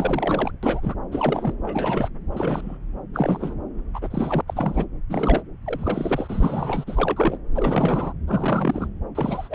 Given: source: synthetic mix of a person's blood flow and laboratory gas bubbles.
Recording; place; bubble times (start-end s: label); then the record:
Doppler ultrasound of blood flow; subclavian vein
0.00-0.51 s: bubbles
0.62-0.95 s: bubbles
1.11-1.55 s: bubbles
1.63-2.09 s: bubbles
2.32-2.77 s: bubbles
3.13-3.55 s: bubbles
3.93-4.41 s: bubbles
4.47-4.85 s: bubbles
5.09-5.42 s: bubbles
5.66-6.84 s: bubbles
6.87-7.38 s: bubbles
7.55-8.13 s: bubbles
8.28-8.88 s: bubbles
9.15-9.55 s: bubbles
From the record:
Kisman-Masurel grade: 342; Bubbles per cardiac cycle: rolling drumbeat, 9 or more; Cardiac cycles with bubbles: 100%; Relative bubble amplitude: moderate (0.250 to 0.450); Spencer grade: 3 (all of the cardiac periods contain showers or single bubble signals, but not dominating or overriding the cardiac motion signals); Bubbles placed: anywhere in the cardiac cycle